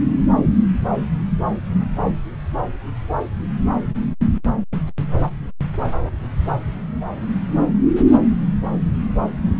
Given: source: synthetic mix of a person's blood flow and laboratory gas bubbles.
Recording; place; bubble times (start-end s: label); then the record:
Doppler ultrasound of blood flow; subclavian vein
no bubbles
From the record:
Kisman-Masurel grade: 000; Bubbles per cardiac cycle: 0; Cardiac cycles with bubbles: 0%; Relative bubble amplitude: no bubbles discernible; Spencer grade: 0 (complete lack of bubble signals)